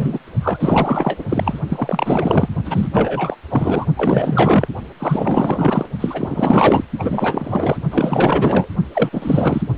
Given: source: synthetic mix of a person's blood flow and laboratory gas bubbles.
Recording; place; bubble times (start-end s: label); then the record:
Doppler ultrasound of blood flow; precordium
0.00-0.18 s: bubbles
0.41-1.25 s: bubbles
1.29-1.59 s: bubbles
1.69-2.48 s: bubbles
2.65-2.89 s: bubbles
2.93-3.36 s: bubbles
3.50-3.86 s: bubbles
3.96-4.67 s: bubbles
5.00-5.86 s: bubbles
5.99-6.84 s: bubbles
6.99-7.79 s: bubbles
7.91-8.69 s: bubbles
8.93-9.10 s: bubbles
9.12-9.62 s: bubbles
From the record:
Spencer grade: 4 (maximum detectable bubble signal sounding continuously throughout systole and diastole of every cardiac period, and overriding the amplitude of the normal cardiac signals); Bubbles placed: only in the low amplitude regions of the cardiac cycle